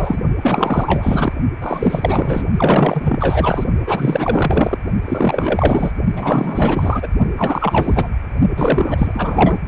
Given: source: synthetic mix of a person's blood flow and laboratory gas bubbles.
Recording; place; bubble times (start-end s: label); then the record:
Doppler ultrasound of blood flow; precordium
0.00-0.18 s: bubbles
0.42-1.33 s: bubbles
1.61-2.46 s: bubbles
2.57-3.66 s: bubbles
3.86-4.79 s: bubbles
5.05-5.91 s: bubbles
6.15-7.08 s: bubbles
7.37-8.11 s: bubbles
8.56-9.57 s: bubbles
From the record:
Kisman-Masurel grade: 444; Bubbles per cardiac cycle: continuous sound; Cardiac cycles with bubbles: 100%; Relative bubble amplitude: maximal (0.775 to 0.999); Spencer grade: 4 (maximum detectable bubble signal sounding continuously throughout systole and diastole of every cardiac period, and overriding the amplitude of the normal cardiac signals); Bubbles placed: only in the low amplitude regions of the cardiac cycle